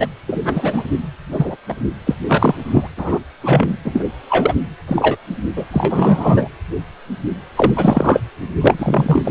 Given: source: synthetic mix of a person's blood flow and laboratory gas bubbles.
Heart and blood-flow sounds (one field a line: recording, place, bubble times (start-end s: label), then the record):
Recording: Doppler ultrasound of blood flow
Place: precordium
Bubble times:
0.00-0.07 s: bubbles
0.27-0.83 s: bubbles
1.31-1.57 s: bubbles
1.68-1.76 s: bubbles
2.06-2.15 s: bubbles
2.28-2.54 s: bubbles
2.72-2.88 s: bubbles
2.97-3.18 s: bubbles
3.43-3.76 s: bubbles
3.84-4.04 s: bubbles
4.29-4.56 s: bubbles
4.87-5.17 s: bubbles
5.56-5.64 s: bubbles
5.71-6.48 s: bubbles
7.56-7.72 s: bubbles
7.76-8.21 s: bubbles
8.61-8.74 s: bubbles
8.79-9.31 s: bubbles
From the record:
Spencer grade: 3 (all of the cardiac periods contain showers or single bubble signals, but not dominating or overriding the cardiac motion signals)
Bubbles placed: anywhere in the cardiac cycle